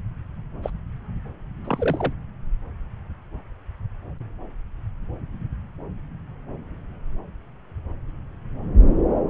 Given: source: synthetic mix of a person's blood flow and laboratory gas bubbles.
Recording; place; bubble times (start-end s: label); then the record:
Doppler ultrasound of blood flow; subclavian vein
0.63-0.70 s: bubbles
1.64-2.13 s: bubbles
From the record:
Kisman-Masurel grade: 221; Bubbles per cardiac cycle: several, 3 to 8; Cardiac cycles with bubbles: 10 to 50%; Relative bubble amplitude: barely perceptible (0.100 to 0.250); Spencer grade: 2 (many but less than half of the cardiac periods contain bubble signals, singularly or in groups); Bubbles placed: anywhere in the cardiac cycle